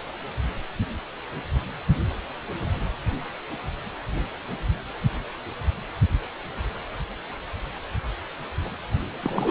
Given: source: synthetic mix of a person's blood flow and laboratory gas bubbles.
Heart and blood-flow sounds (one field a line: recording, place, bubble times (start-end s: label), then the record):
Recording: Doppler ultrasound of blood flow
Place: precordium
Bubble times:
9.22-9.51 s: bubbles
From the record:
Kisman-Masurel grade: 212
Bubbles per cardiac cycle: several, 3 to 8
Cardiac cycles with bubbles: 1 to 10%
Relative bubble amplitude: moderate (0.250 to 0.450)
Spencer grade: 1 (occasional bubble signal discernible with the cardiac motion signal, with majority of cardiac periods free of bubbles)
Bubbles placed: only in the low amplitude regions of the cardiac cycle